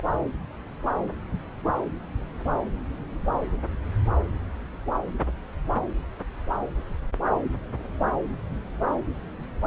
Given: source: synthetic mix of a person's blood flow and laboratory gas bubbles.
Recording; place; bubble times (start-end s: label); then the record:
Doppler ultrasound of blood flow; subclavian vein
0.00-0.04 s: bubbles
From the record:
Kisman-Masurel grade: 112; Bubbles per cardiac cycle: 1 to 2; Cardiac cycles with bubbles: 1 to 10%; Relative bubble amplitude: moderate (0.250 to 0.450); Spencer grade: 1 (occasional bubble signal discernible with the cardiac motion signal, with majority of cardiac periods free of bubbles); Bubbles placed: anywhere in the cardiac cycle